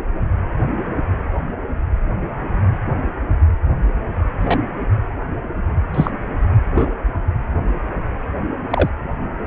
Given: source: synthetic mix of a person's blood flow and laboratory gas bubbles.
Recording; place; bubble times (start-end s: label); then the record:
Doppler ultrasound of blood flow; precordium
0.00-0.02 s: bubbles
4.41-4.58 s: bubbles
5.94-6.11 s: bubbles
6.75-6.92 s: bubbles
8.70-8.89 s: bubbles
From the record:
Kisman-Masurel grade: 122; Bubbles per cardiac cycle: 1 to 2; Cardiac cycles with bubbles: 10 to 50%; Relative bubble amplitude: moderate (0.250 to 0.450); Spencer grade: 2 (many but less than half of the cardiac periods contain bubble signals, singularly or in groups); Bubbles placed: anywhere in the cardiac cycle